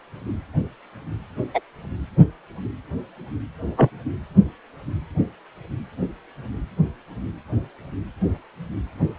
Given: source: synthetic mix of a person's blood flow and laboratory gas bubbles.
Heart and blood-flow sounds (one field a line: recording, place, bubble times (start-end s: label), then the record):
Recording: Doppler ultrasound of blood flow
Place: precordium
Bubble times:
1.54-1.60 s: bubbles
3.77-3.91 s: bubbles
From the record:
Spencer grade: 2 (many but less than half of the cardiac periods contain bubble signals, singularly or in groups)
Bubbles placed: anywhere in the cardiac cycle